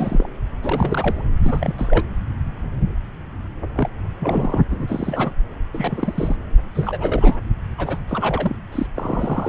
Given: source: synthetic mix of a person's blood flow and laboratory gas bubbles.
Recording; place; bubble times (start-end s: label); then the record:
Doppler ultrasound of blood flow; subclavian vein
0.00-0.29 s: bubbles
0.62-1.26 s: bubbles
1.44-1.75 s: bubbles
1.78-2.04 s: bubbles
3.75-3.89 s: bubbles
4.19-4.61 s: bubbles
4.70-5.32 s: bubbles
5.73-6.36 s: bubbles
6.74-7.38 s: bubbles
7.77-7.99 s: bubbles
8.08-8.56 s: bubbles
8.71-8.87 s: bubbles
8.95-9.49 s: bubbles
From the record:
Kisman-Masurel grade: 332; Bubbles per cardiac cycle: rolling drumbeat, 9 or more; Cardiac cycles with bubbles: 50 to 99%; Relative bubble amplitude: moderate (0.250 to 0.450); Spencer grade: 3 (all of the cardiac periods contain showers or single bubble signals, but not dominating or overriding the cardiac motion signals); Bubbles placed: anywhere in the cardiac cycle